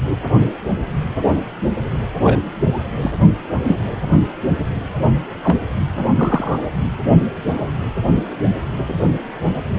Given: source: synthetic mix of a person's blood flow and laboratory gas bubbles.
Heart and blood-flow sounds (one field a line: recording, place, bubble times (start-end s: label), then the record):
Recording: Doppler ultrasound of blood flow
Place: precordium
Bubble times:
2.23-2.39 s: bubbles
3.01-3.11 s: bubbles
3.67-3.78 s: bubbles
5.43-5.57 s: bubbles
6.18-6.62 s: bubbles
8.88-8.94 s: bubbles
From the record:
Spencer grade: 2 (many but less than half of the cardiac periods contain bubble signals, singularly or in groups)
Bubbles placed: anywhere in the cardiac cycle